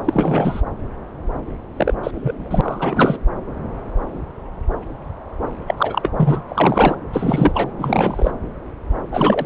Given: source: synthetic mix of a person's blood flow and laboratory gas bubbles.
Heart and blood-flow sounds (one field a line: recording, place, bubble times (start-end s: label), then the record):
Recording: Doppler ultrasound of blood flow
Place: subclavian vein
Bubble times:
0.04-0.62 s: bubbles
1.77-1.94 s: bubbles
2.03-2.11 s: bubbles
2.14-3.19 s: bubbles
5.67-5.74 s: bubbles
5.77-6.10 s: bubbles
6.17-6.42 s: bubbles
6.47-6.95 s: bubbles
7.12-7.71 s: bubbles
7.78-8.31 s: bubbles
9.12-9.46 s: bubbles
From the record:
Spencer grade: 3 (all of the cardiac periods contain showers or single bubble signals, but not dominating or overriding the cardiac motion signals)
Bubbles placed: anywhere in the cardiac cycle